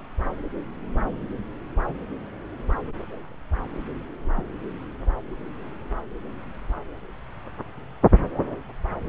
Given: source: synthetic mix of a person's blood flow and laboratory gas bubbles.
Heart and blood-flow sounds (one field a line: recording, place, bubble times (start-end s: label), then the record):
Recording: Doppler ultrasound of blood flow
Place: subclavian vein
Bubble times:
4.34-4.42 s: bubbles
From the record:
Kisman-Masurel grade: 111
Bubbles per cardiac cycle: 1 to 2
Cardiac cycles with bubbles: 1 to 10%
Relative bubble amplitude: barely perceptible (0.100 to 0.250)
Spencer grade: 1 (occasional bubble signal discernible with the cardiac motion signal, with majority of cardiac periods free of bubbles)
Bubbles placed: anywhere in the cardiac cycle